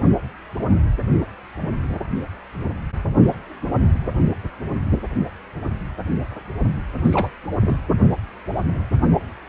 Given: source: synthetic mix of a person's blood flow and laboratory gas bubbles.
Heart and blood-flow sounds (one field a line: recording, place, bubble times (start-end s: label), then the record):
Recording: Doppler ultrasound of blood flow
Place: precordium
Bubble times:
7.04-7.29 s: bubbles
7.60-7.77 s: bubbles
From the record:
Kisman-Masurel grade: 211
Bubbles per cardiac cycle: several, 3 to 8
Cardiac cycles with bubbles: 1 to 10%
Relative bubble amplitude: barely perceptible (0.100 to 0.250)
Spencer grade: 1 (occasional bubble signal discernible with the cardiac motion signal, with majority of cardiac periods free of bubbles)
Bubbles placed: anywhere in the cardiac cycle